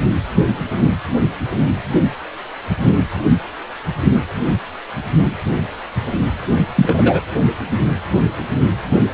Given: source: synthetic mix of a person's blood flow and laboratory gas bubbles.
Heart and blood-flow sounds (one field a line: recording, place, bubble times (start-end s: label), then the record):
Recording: Doppler ultrasound of blood flow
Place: precordium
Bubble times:
6.75-7.20 s: bubbles
From the record:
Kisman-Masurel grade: 213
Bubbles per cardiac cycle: several, 3 to 8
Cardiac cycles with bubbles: 1 to 10%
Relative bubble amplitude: loud (0.450 to 0.775)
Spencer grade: 1 (occasional bubble signal discernible with the cardiac motion signal, with majority of cardiac periods free of bubbles)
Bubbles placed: only in the low amplitude regions of the cardiac cycle